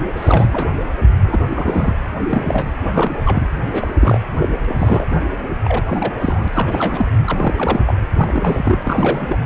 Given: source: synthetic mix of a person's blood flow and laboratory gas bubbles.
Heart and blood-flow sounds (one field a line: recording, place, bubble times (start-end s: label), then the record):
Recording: Doppler ultrasound of blood flow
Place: precordium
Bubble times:
0.16-0.49 s: bubbles
0.52-0.68 s: bubbles
1.22-1.40 s: bubbles
1.50-1.95 s: bubbles
2.31-2.69 s: bubbles
2.85-2.90 s: bubbles
2.92-3.20 s: bubbles
3.25-3.46 s: bubbles
3.73-3.92 s: bubbles
4.00-4.20 s: bubbles
4.34-4.75 s: bubbles
4.78-5.23 s: bubbles
5.64-5.83 s: bubbles
5.88-6.13 s: bubbles
6.20-6.48 s: bubbles
6.53-7.09 s: bubbles
7.26-7.80 s: bubbles
7.86-7.95 s: bubbles
8.17-9.38 s: bubbles
From the record:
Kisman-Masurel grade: 342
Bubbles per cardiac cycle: rolling drumbeat, 9 or more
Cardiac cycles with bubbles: 100%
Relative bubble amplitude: moderate (0.250 to 0.450)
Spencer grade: 3 (all of the cardiac periods contain showers or single bubble signals, but not dominating or overriding the cardiac motion signals)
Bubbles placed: anywhere in the cardiac cycle